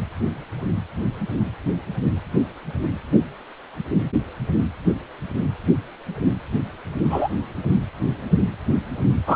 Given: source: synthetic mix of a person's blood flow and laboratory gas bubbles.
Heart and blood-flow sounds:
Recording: Doppler ultrasound of blood flow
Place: precordium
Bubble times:
7.09-7.28 s: bubbles
9.26-9.35 s: bubbles
From the record:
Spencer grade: 2 (many but less than half of the cardiac periods contain bubble signals, singularly or in groups)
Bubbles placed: anywhere in the cardiac cycle

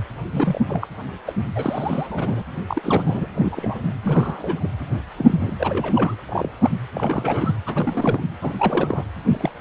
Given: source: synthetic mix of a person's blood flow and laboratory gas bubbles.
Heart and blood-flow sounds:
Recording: Doppler ultrasound of blood flow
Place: precordium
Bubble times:
0.30-0.60 s: bubbles
0.69-0.87 s: bubbles
1.27-1.33 s: bubbles
1.56-2.42 s: bubbles
2.68-3.27 s: bubbles
3.35-3.94 s: bubbles
4.03-4.67 s: bubbles
4.92-5.00 s: bubbles
5.17-5.54 s: bubbles
5.59-6.16 s: bubbles
6.28-6.49 s: bubbles
6.60-6.70 s: bubbles
6.93-7.54 s: bubbles
7.66-8.21 s: bubbles
8.42-9.04 s: bubbles
9.27-9.52 s: bubbles
From the record:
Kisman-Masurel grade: 242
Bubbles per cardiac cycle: several, 3 to 8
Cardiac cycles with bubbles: 100%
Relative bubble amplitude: moderate (0.250 to 0.450)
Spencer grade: 3 (all of the cardiac periods contain showers or single bubble signals, but not dominating or overriding the cardiac motion signals)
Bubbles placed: anywhere in the cardiac cycle

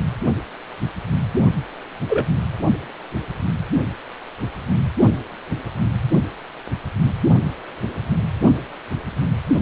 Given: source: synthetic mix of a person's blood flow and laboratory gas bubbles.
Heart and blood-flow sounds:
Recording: Doppler ultrasound of blood flow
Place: precordium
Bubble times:
2.09-2.28 s: bubbles
From the record:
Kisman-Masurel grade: 113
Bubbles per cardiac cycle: 1 to 2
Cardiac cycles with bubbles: 1 to 10%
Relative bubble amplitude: loud (0.450 to 0.775)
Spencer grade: 1 (occasional bubble signal discernible with the cardiac motion signal, with majority of cardiac periods free of bubbles)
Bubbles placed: only in the low amplitude regions of the cardiac cycle

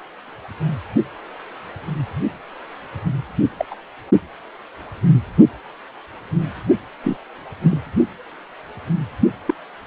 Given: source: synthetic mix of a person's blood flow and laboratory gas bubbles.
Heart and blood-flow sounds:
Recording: Doppler ultrasound of blood flow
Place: precordium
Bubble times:
3.58-3.65 s: bubbles
3.70-3.75 s: bubbles
7.03-7.17 s: bubbles
7.62-7.78 s: bubbles
9.46-9.54 s: bubbles
From the record:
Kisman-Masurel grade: 122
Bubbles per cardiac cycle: 1 to 2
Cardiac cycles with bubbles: 10 to 50%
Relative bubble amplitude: moderate (0.250 to 0.450)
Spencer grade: 2 (many but less than half of the cardiac periods contain bubble signals, singularly or in groups)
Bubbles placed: only in the low amplitude regions of the cardiac cycle

